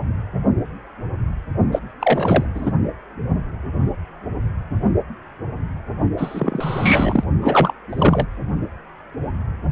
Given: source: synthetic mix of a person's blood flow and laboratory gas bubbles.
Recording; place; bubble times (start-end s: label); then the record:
Doppler ultrasound of blood flow; precordium
1.72-1.79 s: bubbles
2.00-2.46 s: bubbles
2.55-2.72 s: bubbles
6.17-7.23 s: bubbles
7.41-7.73 s: bubbles
7.89-8.26 s: bubbles
From the record:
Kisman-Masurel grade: 223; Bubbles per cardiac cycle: several, 3 to 8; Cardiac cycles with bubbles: 10 to 50%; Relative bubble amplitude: loud (0.450 to 0.775); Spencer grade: 2 (many but less than half of the cardiac periods contain bubble signals, singularly or in groups); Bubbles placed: only in the low amplitude regions of the cardiac cycle